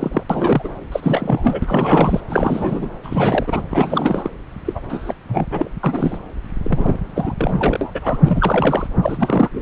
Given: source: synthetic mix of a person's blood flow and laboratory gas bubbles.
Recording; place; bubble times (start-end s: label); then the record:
Doppler ultrasound of blood flow; subclavian vein
0.00-0.23 s: bubbles
0.29-0.69 s: bubbles
0.92-2.20 s: bubbles
2.28-2.90 s: bubbles
3.03-3.63 s: bubbles
3.70-4.29 s: bubbles
4.65-4.80 s: bubbles
4.89-5.14 s: bubbles
5.27-5.47 s: bubbles
5.51-5.69 s: bubbles
5.83-6.18 s: bubbles
6.62-6.96 s: bubbles
7.16-7.34 s: bubbles
7.37-8.17 s: bubbles
8.25-8.87 s: bubbles
9.02-9.49 s: bubbles
9.53-9.62 s: bubbles
From the record:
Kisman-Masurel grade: 342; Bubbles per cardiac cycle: rolling drumbeat, 9 or more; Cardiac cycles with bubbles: 100%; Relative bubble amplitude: moderate (0.250 to 0.450); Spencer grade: 3 (all of the cardiac periods contain showers or single bubble signals, but not dominating or overriding the cardiac motion signals); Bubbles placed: anywhere in the cardiac cycle